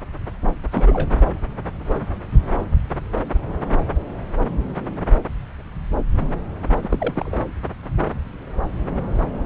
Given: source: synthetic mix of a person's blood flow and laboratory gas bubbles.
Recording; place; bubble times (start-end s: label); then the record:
Doppler ultrasound of blood flow; subclavian vein
0.71-1.11 s: bubbles
6.82-7.38 s: bubbles
From the record:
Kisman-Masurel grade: 222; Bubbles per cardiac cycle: several, 3 to 8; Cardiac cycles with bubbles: 10 to 50%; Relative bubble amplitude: moderate (0.250 to 0.450); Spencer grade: 2 (many but less than half of the cardiac periods contain bubble signals, singularly or in groups); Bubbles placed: anywhere in the cardiac cycle